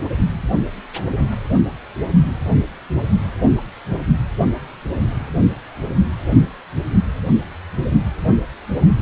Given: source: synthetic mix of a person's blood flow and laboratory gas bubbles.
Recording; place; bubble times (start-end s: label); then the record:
Doppler ultrasound of blood flow; precordium
no bubbles
From the record:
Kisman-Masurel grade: 000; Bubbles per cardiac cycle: 0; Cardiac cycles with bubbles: 0%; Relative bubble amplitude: no bubbles discernible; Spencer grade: 0 (complete lack of bubble signals)